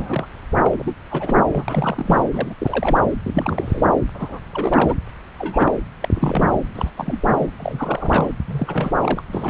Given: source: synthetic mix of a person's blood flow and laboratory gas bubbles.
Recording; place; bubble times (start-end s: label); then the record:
Doppler ultrasound of blood flow; subclavian vein
0.00-0.26 s: bubbles
0.63-0.96 s: bubbles
1.10-1.63 s: bubbles
1.68-2.24 s: bubbles
2.31-2.55 s: bubbles
2.58-2.98 s: bubbles
3.25-3.85 s: bubbles
4.14-4.39 s: bubbles
4.52-4.95 s: bubbles
5.38-5.71 s: bubbles
6.01-6.08 s: bubbles
6.13-6.54 s: bubbles
6.75-6.91 s: bubbles
6.97-7.50 s: bubbles
7.58-8.31 s: bubbles
8.48-8.92 s: bubbles
9.03-9.23 s: bubbles
9.31-9.50 s: bubbles
From the record:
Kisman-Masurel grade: 342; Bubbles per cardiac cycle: rolling drumbeat, 9 or more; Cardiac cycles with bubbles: 100%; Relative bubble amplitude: moderate (0.250 to 0.450); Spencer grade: 3 (all of the cardiac periods contain showers or single bubble signals, but not dominating or overriding the cardiac motion signals); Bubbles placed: anywhere in the cardiac cycle